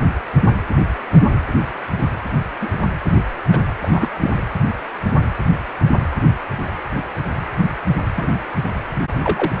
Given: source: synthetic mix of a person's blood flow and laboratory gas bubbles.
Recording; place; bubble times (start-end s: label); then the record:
Doppler ultrasound of blood flow; precordium
2.61-2.69 s: bubbles
3.49-3.58 s: bubbles
3.82-4.08 s: bubbles
4.20-4.33 s: bubbles
8.16-8.31 s: bubbles
9.22-9.53 s: bubbles
9.58-9.60 s: bubbles
From the record:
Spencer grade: 2 (many but less than half of the cardiac periods contain bubble signals, singularly or in groups); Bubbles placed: anywhere in the cardiac cycle